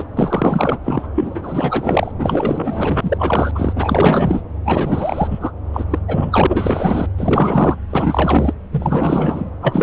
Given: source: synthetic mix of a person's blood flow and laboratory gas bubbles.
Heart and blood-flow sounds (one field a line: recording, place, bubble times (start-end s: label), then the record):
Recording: Doppler ultrasound of blood flow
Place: subclavian vein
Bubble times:
0.00-0.05 s: bubbles
0.17-0.79 s: bubbles
0.84-1.09 s: bubbles
1.15-2.12 s: bubbles
2.19-3.52 s: bubbles
3.55-4.43 s: bubbles
4.65-5.28 s: bubbles
5.30-5.51 s: bubbles
5.73-5.85 s: bubbles
5.90-5.99 s: bubbles
6.08-7.07 s: bubbles
7.17-7.77 s: bubbles
7.90-8.54 s: bubbles
8.71-9.51 s: bubbles
9.61-9.83 s: bubbles
From the record:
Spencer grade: 4 (maximum detectable bubble signal sounding continuously throughout systole and diastole of every cardiac period, and overriding the amplitude of the normal cardiac signals)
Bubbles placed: anywhere in the cardiac cycle